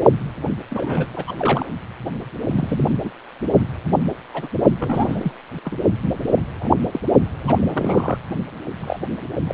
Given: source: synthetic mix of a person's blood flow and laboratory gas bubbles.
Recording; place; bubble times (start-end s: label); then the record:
Doppler ultrasound of blood flow; precordium
0.70-1.07 s: bubbles
1.14-1.35 s: bubbles
1.39-1.66 s: bubbles
2.48-2.96 s: bubbles
3.04-3.10 s: bubbles
3.91-3.98 s: bubbles
4.33-4.47 s: bubbles
4.79-5.31 s: bubbles
5.64-5.79 s: bubbles
6.26-6.35 s: bubbles
6.60-6.69 s: bubbles
6.92-6.99 s: bubbles
7.47-8.18 s: bubbles
8.80-8.99 s: bubbles
9.46-9.54 s: bubbles
From the record:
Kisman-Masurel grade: 242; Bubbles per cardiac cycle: several, 3 to 8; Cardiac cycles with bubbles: 100%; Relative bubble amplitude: moderate (0.250 to 0.450); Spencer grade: 3 (all of the cardiac periods contain showers or single bubble signals, but not dominating or overriding the cardiac motion signals); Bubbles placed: only in the low amplitude regions of the cardiac cycle